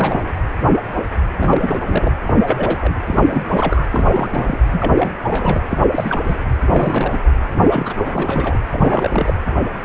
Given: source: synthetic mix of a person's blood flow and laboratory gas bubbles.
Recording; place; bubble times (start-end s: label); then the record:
Doppler ultrasound of blood flow; precordium
0.00-0.23 s: bubbles
1.36-2.12 s: bubbles
2.25-2.33 s: bubbles
2.46-2.98 s: bubbles
3.04-3.85 s: bubbles
3.90-4.58 s: bubbles
4.71-4.92 s: bubbles
4.97-5.12 s: bubbles
5.25-5.62 s: bubbles
5.68-5.87 s: bubbles
5.91-6.36 s: bubbles
6.61-7.18 s: bubbles
7.59-7.94 s: bubbles
8.05-8.60 s: bubbles
8.70-9.36 s: bubbles
From the record:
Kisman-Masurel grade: 332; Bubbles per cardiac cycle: rolling drumbeat, 9 or more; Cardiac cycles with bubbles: 50 to 99%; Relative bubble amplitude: moderate (0.250 to 0.450); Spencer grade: 3 (all of the cardiac periods contain showers or single bubble signals, but not dominating or overriding the cardiac motion signals); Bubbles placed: anywhere in the cardiac cycle